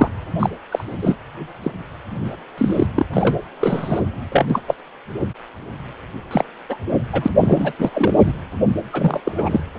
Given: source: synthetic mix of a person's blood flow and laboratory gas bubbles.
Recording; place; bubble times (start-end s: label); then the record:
Doppler ultrasound of blood flow; precordium
0.00-0.09 s: bubbles
0.39-0.50 s: bubbles
0.71-0.84 s: bubbles
1.01-1.16 s: bubbles
1.63-1.72 s: bubbles
2.24-2.36 s: bubbles
2.58-2.87 s: bubbles
2.95-3.06 s: bubbles
3.13-3.38 s: bubbles
3.61-4.00 s: bubbles
4.32-4.46 s: bubbles
4.50-4.62 s: bubbles
4.67-4.75 s: bubbles
6.31-6.44 s: bubbles
6.69-6.77 s: bubbles
7.12-7.29 s: bubbles
7.39-7.73 s: bubbles
7.79-8.33 s: bubbles
8.93-9.21 s: bubbles
9.25-9.61 s: bubbles
From the record:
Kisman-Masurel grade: 243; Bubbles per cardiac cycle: several, 3 to 8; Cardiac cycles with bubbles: 100%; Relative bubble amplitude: loud (0.450 to 0.775); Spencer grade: 3 (all of the cardiac periods contain showers or single bubble signals, but not dominating or overriding the cardiac motion signals); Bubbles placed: anywhere in the cardiac cycle